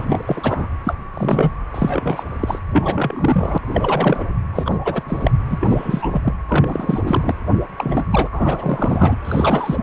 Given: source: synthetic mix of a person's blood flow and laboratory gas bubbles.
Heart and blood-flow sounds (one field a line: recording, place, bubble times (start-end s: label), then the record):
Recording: Doppler ultrasound of blood flow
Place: precordium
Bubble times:
0.00-0.22 s: bubbles
0.26-0.67 s: bubbles
0.84-0.95 s: bubbles
1.14-1.57 s: bubbles
1.74-2.23 s: bubbles
2.40-2.59 s: bubbles
2.71-3.58 s: bubbles
3.73-4.23 s: bubbles
4.52-4.78 s: bubbles
4.84-5.03 s: bubbles
5.07-5.31 s: bubbles
5.50-6.21 s: bubbles
6.24-6.34 s: bubbles
6.48-7.34 s: bubbles
7.76-8.07 s: bubbles
8.11-8.29 s: bubbles
8.32-9.16 s: bubbles
9.25-9.83 s: bubbles
From the record:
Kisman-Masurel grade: 343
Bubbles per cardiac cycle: rolling drumbeat, 9 or more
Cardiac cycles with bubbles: 100%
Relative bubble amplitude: loud (0.450 to 0.775)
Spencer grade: 3 (all of the cardiac periods contain showers or single bubble signals, but not dominating or overriding the cardiac motion signals)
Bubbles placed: anywhere in the cardiac cycle